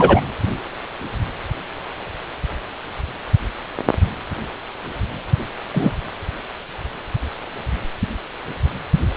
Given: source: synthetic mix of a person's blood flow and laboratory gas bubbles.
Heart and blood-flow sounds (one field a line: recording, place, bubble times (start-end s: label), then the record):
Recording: Doppler ultrasound of blood flow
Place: precordium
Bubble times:
0.00-0.21 s: bubbles
5.74-5.92 s: bubbles
From the record:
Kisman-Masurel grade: 123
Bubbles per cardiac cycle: 1 to 2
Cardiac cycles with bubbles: 10 to 50%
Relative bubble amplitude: loud (0.450 to 0.775)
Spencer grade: 2 (many but less than half of the cardiac periods contain bubble signals, singularly or in groups)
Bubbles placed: anywhere in the cardiac cycle